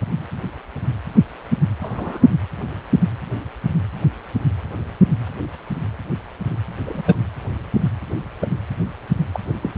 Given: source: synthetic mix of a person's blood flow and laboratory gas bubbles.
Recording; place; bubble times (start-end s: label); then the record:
Doppler ultrasound of blood flow; precordium
1.81-2.29 s: bubbles
6.86-7.03 s: bubbles
7.05-7.17 s: bubbles
8.39-8.47 s: bubbles
9.32-9.40 s: bubbles
9.62-9.70 s: bubbles
From the record:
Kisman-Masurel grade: 122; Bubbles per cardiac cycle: 1 to 2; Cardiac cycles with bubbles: 10 to 50%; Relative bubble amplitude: moderate (0.250 to 0.450); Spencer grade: 2 (many but less than half of the cardiac periods contain bubble signals, singularly or in groups); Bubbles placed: anywhere in the cardiac cycle